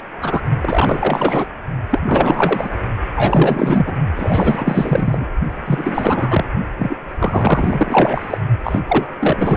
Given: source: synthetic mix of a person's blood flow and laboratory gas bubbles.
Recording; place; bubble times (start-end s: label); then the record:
Doppler ultrasound of blood flow; precordium
0.00-0.03 s: bubbles
0.21-0.41 s: bubbles
0.61-1.47 s: bubbles
1.91-2.00 s: bubbles
2.05-2.69 s: bubbles
3.14-3.96 s: bubbles
4.16-5.30 s: bubbles
5.66-6.44 s: bubbles
6.78-6.97 s: bubbles
7.19-8.38 s: bubbles
8.63-8.80 s: bubbles
8.88-9.07 s: bubbles
9.19-9.57 s: bubbles
From the record:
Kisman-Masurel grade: 444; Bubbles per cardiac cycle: continuous sound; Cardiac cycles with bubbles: 100%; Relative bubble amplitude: maximal (0.775 to 0.999); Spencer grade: 4 (maximum detectable bubble signal sounding continuously throughout systole and diastole of every cardiac period, and overriding the amplitude of the normal cardiac signals); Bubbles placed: only in the low amplitude regions of the cardiac cycle